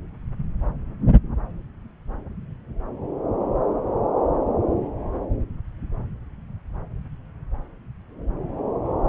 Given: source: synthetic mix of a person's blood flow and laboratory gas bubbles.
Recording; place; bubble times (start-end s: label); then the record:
Doppler ultrasound of blood flow; subclavian vein
no bubbles
From the record:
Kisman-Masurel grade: 000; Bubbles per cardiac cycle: 0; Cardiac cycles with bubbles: 0%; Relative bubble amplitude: no bubbles discernible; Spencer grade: 0 (complete lack of bubble signals)